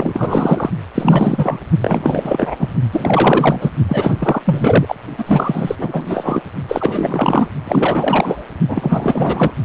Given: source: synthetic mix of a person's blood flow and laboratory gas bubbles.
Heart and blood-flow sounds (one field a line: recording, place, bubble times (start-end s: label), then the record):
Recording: Doppler ultrasound of blood flow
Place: precordium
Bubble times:
0.00-0.70 s: bubbles
0.94-1.58 s: bubbles
1.79-2.70 s: bubbles
2.92-3.71 s: bubbles
3.88-4.42 s: bubbles
4.46-4.96 s: bubbles
5.18-5.75 s: bubbles
5.79-6.42 s: bubbles
6.68-7.48 s: bubbles
7.64-8.44 s: bubbles
8.68-9.54 s: bubbles
From the record:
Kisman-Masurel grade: 444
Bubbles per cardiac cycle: continuous sound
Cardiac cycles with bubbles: 100%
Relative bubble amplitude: maximal (0.775 to 0.999)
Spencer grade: 4 (maximum detectable bubble signal sounding continuously throughout systole and diastole of every cardiac period, and overriding the amplitude of the normal cardiac signals)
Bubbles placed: only in the low amplitude regions of the cardiac cycle